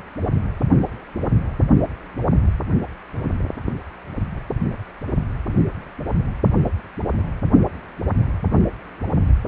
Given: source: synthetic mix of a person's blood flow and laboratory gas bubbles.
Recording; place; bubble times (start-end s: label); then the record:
Doppler ultrasound of blood flow; precordium
no bubbles
From the record:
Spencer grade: 0 (complete lack of bubble signals)